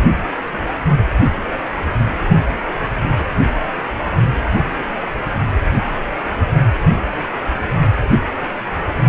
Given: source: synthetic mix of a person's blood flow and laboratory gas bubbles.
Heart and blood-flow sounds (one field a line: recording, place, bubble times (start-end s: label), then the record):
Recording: Doppler ultrasound of blood flow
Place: precordium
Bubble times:
3.16-3.27 s: bubbles
4.52-4.71 s: bubbles
From the record:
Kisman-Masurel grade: 121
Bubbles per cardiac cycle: 1 to 2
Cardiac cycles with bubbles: 10 to 50%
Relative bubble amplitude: barely perceptible (0.100 to 0.250)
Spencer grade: 2 (many but less than half of the cardiac periods contain bubble signals, singularly or in groups)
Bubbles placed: only in the low amplitude regions of the cardiac cycle